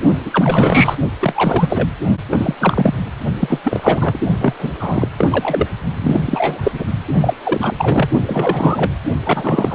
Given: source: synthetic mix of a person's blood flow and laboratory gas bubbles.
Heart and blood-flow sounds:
Doppler ultrasound of blood flow; precordium
0.25-0.95 s: bubbles
1.21-1.88 s: bubbles
2.30-2.55 s: bubbles
2.60-2.94 s: bubbles
3.40-3.59 s: bubbles
3.64-4.19 s: bubbles
4.41-4.54 s: bubbles
4.58-4.71 s: bubbles
4.79-5.08 s: bubbles
5.17-5.67 s: bubbles
5.99-6.20 s: bubbles
6.25-6.71 s: bubbles
6.74-6.84 s: bubbles
7.21-7.34 s: bubbles
7.44-8.10 s: bubbles
8.27-8.92 s: bubbles
9.26-9.75 s: bubbles
From the record:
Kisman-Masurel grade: 343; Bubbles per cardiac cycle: rolling drumbeat, 9 or more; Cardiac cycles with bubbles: 100%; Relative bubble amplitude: loud (0.450 to 0.775); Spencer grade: 3 (all of the cardiac periods contain showers or single bubble signals, but not dominating or overriding the cardiac motion signals); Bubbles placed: only in the low amplitude regions of the cardiac cycle

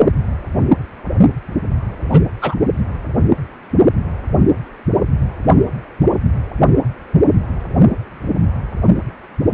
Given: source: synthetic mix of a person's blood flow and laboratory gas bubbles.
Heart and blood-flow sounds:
Doppler ultrasound of blood flow; precordium
2.10-2.23 s: bubbles
2.41-2.56 s: bubbles
From the record:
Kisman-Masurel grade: 123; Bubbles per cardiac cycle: 1 to 2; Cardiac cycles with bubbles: 10 to 50%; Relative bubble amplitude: loud (0.450 to 0.775); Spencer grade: 2 (many but less than half of the cardiac periods contain bubble signals, singularly or in groups); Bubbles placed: only in the low amplitude regions of the cardiac cycle

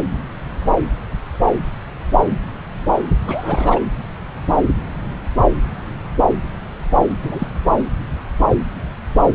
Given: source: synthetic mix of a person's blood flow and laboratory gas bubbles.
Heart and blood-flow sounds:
Doppler ultrasound of blood flow; subclavian vein
3.22-3.80 s: bubbles
7.23-7.48 s: bubbles
From the record:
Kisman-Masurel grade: 212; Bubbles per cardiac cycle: several, 3 to 8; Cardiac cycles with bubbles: 1 to 10%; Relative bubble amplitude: moderate (0.250 to 0.450); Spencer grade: 1 (occasional bubble signal discernible with the cardiac motion signal, with majority of cardiac periods free of bubbles); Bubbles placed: anywhere in the cardiac cycle

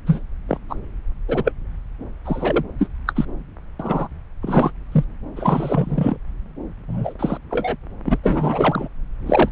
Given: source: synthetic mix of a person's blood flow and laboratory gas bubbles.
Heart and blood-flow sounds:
Doppler ultrasound of blood flow; subclavian vein
0.06-0.22 s: bubbles
0.48-0.58 s: bubbles
0.69-0.76 s: bubbles
1.28-1.52 s: bubbles
2.25-2.64 s: bubbles
2.79-2.89 s: bubbles
3.07-3.25 s: bubbles
3.79-4.08 s: bubbles
4.42-4.71 s: bubbles
4.92-5.04 s: bubbles
5.36-6.17 s: bubbles
6.88-7.14 s: bubbles
7.19-7.38 s: bubbles
7.50-7.76 s: bubbles
8.05-8.18 s: bubbles
8.23-8.88 s: bubbles
9.26-9.49 s: bubbles
From the record:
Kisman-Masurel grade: 243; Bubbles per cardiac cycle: several, 3 to 8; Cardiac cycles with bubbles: 100%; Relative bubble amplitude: loud (0.450 to 0.775); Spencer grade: 3 (all of the cardiac periods contain showers or single bubble signals, but not dominating or overriding the cardiac motion signals); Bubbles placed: anywhere in the cardiac cycle

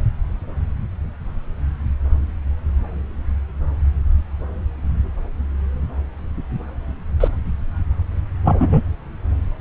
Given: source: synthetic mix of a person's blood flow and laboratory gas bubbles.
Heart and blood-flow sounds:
Doppler ultrasound of blood flow; subclavian vein
7.20-7.28 s: bubbles
8.44-8.82 s: bubbles
From the record:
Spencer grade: 1 (occasional bubble signal discernible with the cardiac motion signal, with majority of cardiac periods free of bubbles); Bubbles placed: anywhere in the cardiac cycle

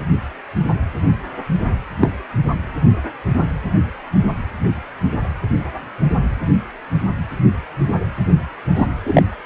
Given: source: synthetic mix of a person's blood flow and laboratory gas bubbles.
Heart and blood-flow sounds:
Doppler ultrasound of blood flow; precordium
2.00-2.12 s: bubbles
8.76-8.87 s: bubbles
9.05-9.23 s: bubbles
From the record:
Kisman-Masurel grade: 123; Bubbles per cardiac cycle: 1 to 2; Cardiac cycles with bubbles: 10 to 50%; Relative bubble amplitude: loud (0.450 to 0.775); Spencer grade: 2 (many but less than half of the cardiac periods contain bubble signals, singularly or in groups); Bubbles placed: anywhere in the cardiac cycle

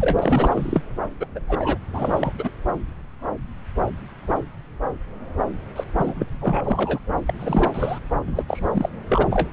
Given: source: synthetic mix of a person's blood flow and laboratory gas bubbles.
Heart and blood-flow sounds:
Doppler ultrasound of blood flow; subclavian vein
0.00-0.82 s: bubbles
1.20-1.26 s: bubbles
1.35-1.39 s: bubbles
1.48-1.78 s: bubbles
1.93-2.32 s: bubbles
2.38-2.50 s: bubbles
5.75-5.84 s: bubbles
5.98-6.26 s: bubbles
6.33-6.99 s: bubbles
7.26-7.33 s: bubbles
7.39-7.70 s: bubbles
7.74-8.00 s: bubbles
8.27-8.43 s: bubbles
8.48-8.90 s: bubbles
9.10-9.27 s: bubbles
9.31-9.49 s: bubbles
From the record:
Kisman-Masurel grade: 332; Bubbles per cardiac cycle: rolling drumbeat, 9 or more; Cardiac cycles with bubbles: 50 to 99%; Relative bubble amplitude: moderate (0.250 to 0.450); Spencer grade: 3 (all of the cardiac periods contain showers or single bubble signals, but not dominating or overriding the cardiac motion signals); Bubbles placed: anywhere in the cardiac cycle

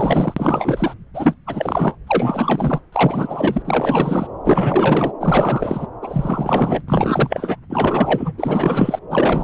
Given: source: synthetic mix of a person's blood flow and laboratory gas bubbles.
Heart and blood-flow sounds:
Doppler ultrasound of blood flow; subclavian vein
0.00-0.94 s: bubbles
1.14-1.35 s: bubbles
1.47-1.96 s: bubbles
2.06-2.81 s: bubbles
2.92-4.28 s: bubbles
4.44-5.12 s: bubbles
5.21-5.87 s: bubbles
6.01-6.83 s: bubbles
6.87-7.57 s: bubbles
7.69-8.34 s: bubbles
8.38-8.99 s: bubbles
9.10-9.44 s: bubbles
From the record:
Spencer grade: 4 (maximum detectable bubble signal sounding continuously throughout systole and diastole of every cardiac period, and overriding the amplitude of the normal cardiac signals); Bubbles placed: anywhere in the cardiac cycle

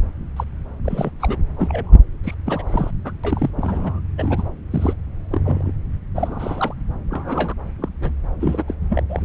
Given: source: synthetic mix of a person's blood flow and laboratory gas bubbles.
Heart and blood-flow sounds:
Doppler ultrasound of blood flow; subclavian vein
0.36-0.44 s: bubbles
0.85-1.10 s: bubbles
1.19-1.38 s: bubbles
1.52-1.93 s: bubbles
2.24-2.35 s: bubbles
2.46-2.65 s: bubbles
2.68-2.91 s: bubbles
3.04-3.12 s: bubbles
3.24-3.50 s: bubbles
3.56-4.01 s: bubbles
4.18-4.49 s: bubbles
4.71-4.93 s: bubbles
5.32-5.71 s: bubbles
6.16-6.74 s: bubbles
7.11-7.54 s: bubbles
7.82-7.89 s: bubbles
8.00-8.11 s: bubbles
8.40-8.62 s: bubbles
8.67-8.74 s: bubbles
8.88-9.02 s: bubbles
9.08-9.25 s: bubbles
From the record:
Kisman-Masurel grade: 342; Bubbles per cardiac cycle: rolling drumbeat, 9 or more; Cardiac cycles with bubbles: 100%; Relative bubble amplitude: moderate (0.250 to 0.450); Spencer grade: 3 (all of the cardiac periods contain showers or single bubble signals, but not dominating or overriding the cardiac motion signals); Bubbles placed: anywhere in the cardiac cycle

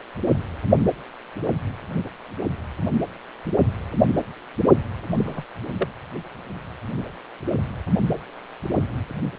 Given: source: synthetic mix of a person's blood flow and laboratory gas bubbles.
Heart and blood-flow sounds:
Doppler ultrasound of blood flow; precordium
5.12-5.45 s: bubbles
5.72-5.86 s: bubbles
From the record:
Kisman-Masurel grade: 111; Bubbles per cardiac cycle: 1 to 2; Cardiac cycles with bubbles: 1 to 10%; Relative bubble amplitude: barely perceptible (0.100 to 0.250); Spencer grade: 1 (occasional bubble signal discernible with the cardiac motion signal, with majority of cardiac periods free of bubbles); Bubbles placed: anywhere in the cardiac cycle

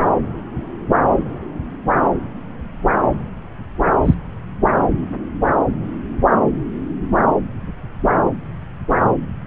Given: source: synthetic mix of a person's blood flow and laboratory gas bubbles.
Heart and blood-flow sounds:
Doppler ultrasound of blood flow; subclavian vein
4.04-4.14 s: bubbles
From the record:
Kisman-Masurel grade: 113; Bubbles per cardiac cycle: 1 to 2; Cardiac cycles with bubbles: 1 to 10%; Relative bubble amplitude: loud (0.450 to 0.775); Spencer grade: 1 (occasional bubble signal discernible with the cardiac motion signal, with majority of cardiac periods free of bubbles); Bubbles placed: anywhere in the cardiac cycle

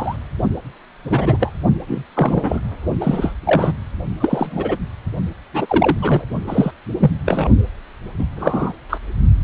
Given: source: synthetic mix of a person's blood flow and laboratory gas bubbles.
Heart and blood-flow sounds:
Doppler ultrasound of blood flow; precordium
0.00-0.16 s: bubbles
1.09-1.37 s: bubbles
1.40-1.52 s: bubbles
1.88-2.03 s: bubbles
2.14-2.61 s: bubbles
3.00-3.33 s: bubbles
3.44-3.72 s: bubbles
4.19-4.76 s: bubbles
5.53-5.98 s: bubbles
6.01-6.25 s: bubbles
6.47-6.71 s: bubbles
6.99-7.11 s: bubbles
7.25-7.50 s: bubbles
8.19-8.25 s: bubbles
8.36-8.72 s: bubbles
8.89-8.98 s: bubbles
From the record:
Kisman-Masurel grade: 243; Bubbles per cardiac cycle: several, 3 to 8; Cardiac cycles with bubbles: 100%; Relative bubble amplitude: loud (0.450 to 0.775); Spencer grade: 3 (all of the cardiac periods contain showers or single bubble signals, but not dominating or overriding the cardiac motion signals); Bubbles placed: only in the low amplitude regions of the cardiac cycle

